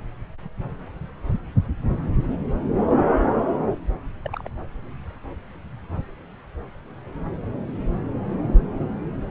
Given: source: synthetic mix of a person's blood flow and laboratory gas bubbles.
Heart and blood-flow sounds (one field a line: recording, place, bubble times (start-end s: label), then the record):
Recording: Doppler ultrasound of blood flow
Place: subclavian vein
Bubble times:
4.25-4.48 s: bubbles
From the record:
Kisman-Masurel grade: 121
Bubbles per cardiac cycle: 1 to 2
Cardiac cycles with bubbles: 10 to 50%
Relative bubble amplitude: barely perceptible (0.100 to 0.250)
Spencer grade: 2 (many but less than half of the cardiac periods contain bubble signals, singularly or in groups)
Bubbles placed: anywhere in the cardiac cycle